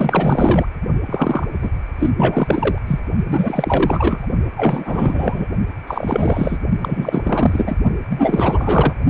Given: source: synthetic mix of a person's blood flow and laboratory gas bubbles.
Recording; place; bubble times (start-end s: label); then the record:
Doppler ultrasound of blood flow; precordium
0.00-0.66 s: bubbles
1.06-1.46 s: bubbles
1.61-1.69 s: bubbles
1.98-2.10 s: bubbles
2.17-2.79 s: bubbles
2.87-3.00 s: bubbles
3.27-4.27 s: bubbles
4.56-5.46 s: bubbles
5.87-6.58 s: bubbles
6.81-7.75 s: bubbles
8.09-8.93 s: bubbles
From the record:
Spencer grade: 4 (maximum detectable bubble signal sounding continuously throughout systole and diastole of every cardiac period, and overriding the amplitude of the normal cardiac signals); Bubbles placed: only in the low amplitude regions of the cardiac cycle